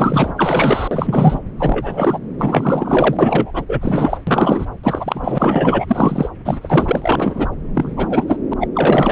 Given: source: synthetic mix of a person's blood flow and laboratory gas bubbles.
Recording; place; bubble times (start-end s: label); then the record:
Doppler ultrasound of blood flow; subclavian vein
0.00-0.33 s: bubbles
0.37-0.88 s: bubbles
0.91-1.39 s: bubbles
1.57-2.19 s: bubbles
2.38-3.65 s: bubbles
3.69-4.18 s: bubbles
4.27-4.66 s: bubbles
4.83-6.29 s: bubbles
6.45-7.49 s: bubbles
7.75-8.24 s: bubbles
8.27-8.38 s: bubbles
8.51-8.54 s: bubbles
8.61-8.68 s: bubbles
8.75-9.11 s: bubbles
From the record:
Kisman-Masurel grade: 343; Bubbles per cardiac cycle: rolling drumbeat, 9 or more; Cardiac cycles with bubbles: 100%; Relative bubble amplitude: loud (0.450 to 0.775); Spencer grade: 3 (all of the cardiac periods contain showers or single bubble signals, but not dominating or overriding the cardiac motion signals); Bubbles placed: anywhere in the cardiac cycle